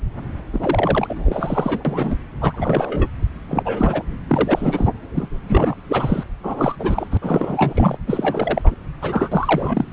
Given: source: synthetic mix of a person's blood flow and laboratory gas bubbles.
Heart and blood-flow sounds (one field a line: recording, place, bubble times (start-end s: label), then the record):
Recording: Doppler ultrasound of blood flow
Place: subclavian vein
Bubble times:
0.53-2.15 s: bubbles
2.40-3.08 s: bubbles
3.48-4.03 s: bubbles
4.29-4.88 s: bubbles
5.13-5.29 s: bubbles
5.32-5.76 s: bubbles
5.88-6.24 s: bubbles
6.43-6.76 s: bubbles
6.79-7.07 s: bubbles
7.11-7.17 s: bubbles
7.21-7.97 s: bubbles
8.06-8.76 s: bubbles
9.01-9.93 s: bubbles
From the record:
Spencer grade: 3 (all of the cardiac periods contain showers or single bubble signals, but not dominating or overriding the cardiac motion signals)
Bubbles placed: anywhere in the cardiac cycle